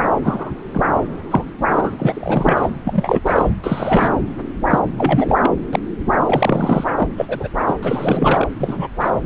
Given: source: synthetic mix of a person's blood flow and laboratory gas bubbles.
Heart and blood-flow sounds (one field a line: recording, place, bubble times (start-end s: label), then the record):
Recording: Doppler ultrasound of blood flow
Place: subclavian vein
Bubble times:
0.24-0.51 s: bubbles
0.74-0.81 s: bubbles
1.30-1.45 s: bubbles
1.69-1.96 s: bubbles
1.99-2.68 s: bubbles
2.84-3.21 s: bubbles
3.25-3.49 s: bubbles
3.64-4.11 s: bubbles
4.70-4.79 s: bubbles
4.97-5.36 s: bubbles
5.43-5.53 s: bubbles
5.73-5.79 s: bubbles
6.27-6.84 s: bubbles
6.95-7.08 s: bubbles
7.17-7.48 s: bubbles
7.68-7.74 s: bubbles
7.82-8.47 s: bubbles
8.59-8.88 s: bubbles
9.00-9.10 s: bubbles
From the record:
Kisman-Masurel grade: 243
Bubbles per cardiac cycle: several, 3 to 8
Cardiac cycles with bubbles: 100%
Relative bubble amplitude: loud (0.450 to 0.775)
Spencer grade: 3 (all of the cardiac periods contain showers or single bubble signals, but not dominating or overriding the cardiac motion signals)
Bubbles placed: anywhere in the cardiac cycle